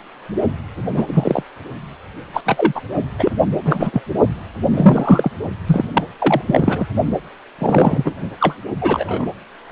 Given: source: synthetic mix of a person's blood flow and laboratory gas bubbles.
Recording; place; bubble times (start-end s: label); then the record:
Doppler ultrasound of blood flow; precordium
0.94-1.43 s: bubbles
2.33-2.42 s: bubbles
2.46-2.81 s: bubbles
3.19-3.31 s: bubbles
3.65-4.02 s: bubbles
4.62-5.30 s: bubbles
5.67-5.85 s: bubbles
5.93-6.04 s: bubbles
6.18-6.42 s: bubbles
6.46-6.88 s: bubbles
7.58-8.15 s: bubbles
8.40-8.55 s: bubbles
8.81-9.27 s: bubbles
From the record:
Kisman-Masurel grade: 233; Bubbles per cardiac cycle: several, 3 to 8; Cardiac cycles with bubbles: 50 to 99%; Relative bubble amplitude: loud (0.450 to 0.775); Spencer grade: 3 (all of the cardiac periods contain showers or single bubble signals, but not dominating or overriding the cardiac motion signals); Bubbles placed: only in the low amplitude regions of the cardiac cycle